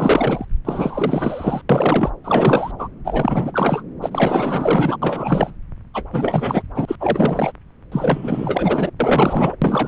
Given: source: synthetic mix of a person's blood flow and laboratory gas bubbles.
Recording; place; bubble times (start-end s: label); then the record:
Doppler ultrasound of blood flow; subclavian vein
0.00-0.46 s: bubbles
0.65-1.61 s: bubbles
1.69-2.11 s: bubbles
2.24-2.71 s: bubbles
2.78-2.88 s: bubbles
3.04-3.82 s: bubbles
4.01-4.97 s: bubbles
5.01-5.54 s: bubbles
5.93-6.04 s: bubbles
6.12-6.62 s: bubbles
6.75-6.96 s: bubbles
7.00-7.52 s: bubbles
7.92-8.90 s: bubbles
9.00-9.55 s: bubbles
9.62-9.87 s: bubbles
From the record:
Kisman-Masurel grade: 444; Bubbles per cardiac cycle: continuous sound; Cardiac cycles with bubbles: 100%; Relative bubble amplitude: maximal (0.775 to 0.999); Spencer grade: 4 (maximum detectable bubble signal sounding continuously throughout systole and diastole of every cardiac period, and overriding the amplitude of the normal cardiac signals); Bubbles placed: anywhere in the cardiac cycle